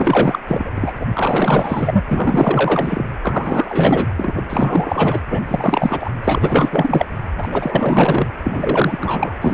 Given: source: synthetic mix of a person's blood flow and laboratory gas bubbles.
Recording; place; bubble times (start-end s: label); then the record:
Doppler ultrasound of blood flow; precordium
0.00-0.40 s: bubbles
0.47-0.72 s: bubbles
0.76-0.92 s: bubbles
0.99-1.07 s: bubbles
1.14-2.02 s: bubbles
2.08-3.05 s: bubbles
3.23-4.07 s: bubbles
4.17-4.44 s: bubbles
4.49-5.22 s: bubbles
5.29-5.41 s: bubbles
5.48-6.11 s: bubbles
6.24-7.06 s: bubbles
7.38-7.49 s: bubbles
7.51-8.27 s: bubbles
8.43-9.36 s: bubbles
9.41-9.54 s: bubbles
From the record:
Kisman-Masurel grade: 444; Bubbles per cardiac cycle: continuous sound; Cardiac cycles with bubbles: 100%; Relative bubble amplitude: maximal (0.775 to 0.999); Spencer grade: 4 (maximum detectable bubble signal sounding continuously throughout systole and diastole of every cardiac period, and overriding the amplitude of the normal cardiac signals); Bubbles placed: anywhere in the cardiac cycle